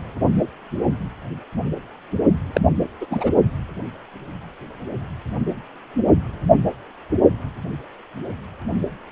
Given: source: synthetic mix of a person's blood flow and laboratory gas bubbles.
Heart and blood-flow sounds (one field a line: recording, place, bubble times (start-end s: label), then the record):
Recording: Doppler ultrasound of blood flow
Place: precordium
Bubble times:
2.53-2.61 s: bubbles
3.00-3.06 s: bubbles
3.10-3.31 s: bubbles
From the record:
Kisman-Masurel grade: 213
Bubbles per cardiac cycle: several, 3 to 8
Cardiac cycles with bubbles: 1 to 10%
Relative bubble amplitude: loud (0.450 to 0.775)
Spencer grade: 1 (occasional bubble signal discernible with the cardiac motion signal, with majority of cardiac periods free of bubbles)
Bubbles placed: only in the low amplitude regions of the cardiac cycle